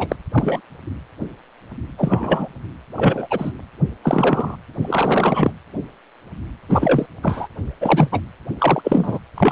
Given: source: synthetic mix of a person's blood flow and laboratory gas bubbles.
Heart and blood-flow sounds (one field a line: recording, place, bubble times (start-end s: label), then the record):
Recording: Doppler ultrasound of blood flow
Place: precordium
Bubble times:
0.00-0.16 s: bubbles
0.32-0.60 s: bubbles
1.98-2.48 s: bubbles
2.95-3.27 s: bubbles
3.30-3.52 s: bubbles
4.03-4.56 s: bubbles
4.82-5.52 s: bubbles
6.69-7.06 s: bubbles
7.23-7.47 s: bubbles
7.81-8.09 s: bubbles
8.12-8.20 s: bubbles
8.58-9.19 s: bubbles
9.36-9.52 s: bubbles
From the record:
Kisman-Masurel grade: 233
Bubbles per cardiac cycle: several, 3 to 8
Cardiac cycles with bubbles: 50 to 99%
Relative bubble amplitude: loud (0.450 to 0.775)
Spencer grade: 3 (all of the cardiac periods contain showers or single bubble signals, but not dominating or overriding the cardiac motion signals)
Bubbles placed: anywhere in the cardiac cycle